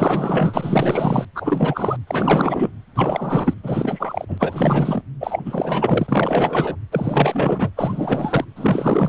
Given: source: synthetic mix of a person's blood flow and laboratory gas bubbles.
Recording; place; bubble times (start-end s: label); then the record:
Doppler ultrasound of blood flow; precordium
0.00-1.25 s: bubbles
1.35-1.96 s: bubbles
2.07-2.70 s: bubbles
2.96-3.54 s: bubbles
3.63-4.25 s: bubbles
4.28-5.03 s: bubbles
5.21-5.43 s: bubbles
5.46-6.76 s: bubbles
6.91-7.70 s: bubbles
7.76-8.45 s: bubbles
8.55-9.09 s: bubbles
From the record:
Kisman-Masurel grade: 444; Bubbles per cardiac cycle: continuous sound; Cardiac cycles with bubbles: 100%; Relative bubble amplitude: maximal (0.775 to 0.999); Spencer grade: 4 (maximum detectable bubble signal sounding continuously throughout systole and diastole of every cardiac period, and overriding the amplitude of the normal cardiac signals); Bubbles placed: anywhere in the cardiac cycle